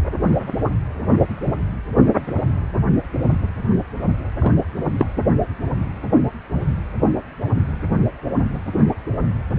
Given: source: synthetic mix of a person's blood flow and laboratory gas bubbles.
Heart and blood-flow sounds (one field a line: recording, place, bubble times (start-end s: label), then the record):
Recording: Doppler ultrasound of blood flow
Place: precordium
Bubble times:
4.41-4.52 s: bubbles
4.99-5.06 s: bubbles
From the record:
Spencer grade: 1 (occasional bubble signal discernible with the cardiac motion signal, with majority of cardiac periods free of bubbles)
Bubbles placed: anywhere in the cardiac cycle